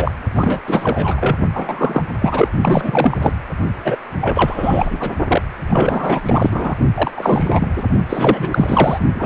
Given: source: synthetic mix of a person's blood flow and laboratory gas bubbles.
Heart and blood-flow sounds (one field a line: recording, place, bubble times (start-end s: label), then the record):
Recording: Doppler ultrasound of blood flow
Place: precordium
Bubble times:
0.00-0.11 s: bubbles
0.35-0.59 s: bubbles
0.67-1.36 s: bubbles
1.53-2.03 s: bubbles
2.19-2.48 s: bubbles
2.61-3.31 s: bubbles
3.78-3.97 s: bubbles
4.21-5.12 s: bubbles
5.28-5.42 s: bubbles
5.70-6.21 s: bubbles
6.25-6.75 s: bubbles
6.96-7.11 s: bubbles
7.17-7.68 s: bubbles
7.77-7.83 s: bubbles
8.09-8.98 s: bubbles
9.14-9.26 s: bubbles
From the record:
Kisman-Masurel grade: 343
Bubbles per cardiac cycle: rolling drumbeat, 9 or more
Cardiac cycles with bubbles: 100%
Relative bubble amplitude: loud (0.450 to 0.775)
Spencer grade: 3 (all of the cardiac periods contain showers or single bubble signals, but not dominating or overriding the cardiac motion signals)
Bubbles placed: only in the low amplitude regions of the cardiac cycle